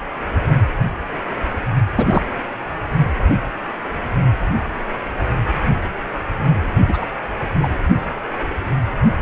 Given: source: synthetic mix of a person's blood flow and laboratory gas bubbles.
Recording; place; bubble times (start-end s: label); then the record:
Doppler ultrasound of blood flow; precordium
1.95-2.23 s: bubbles
6.88-7.06 s: bubbles
7.61-7.71 s: bubbles
From the record:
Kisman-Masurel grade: 223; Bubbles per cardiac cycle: several, 3 to 8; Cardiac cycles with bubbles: 10 to 50%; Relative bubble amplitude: loud (0.450 to 0.775); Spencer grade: 2 (many but less than half of the cardiac periods contain bubble signals, singularly or in groups); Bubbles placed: only in the low amplitude regions of the cardiac cycle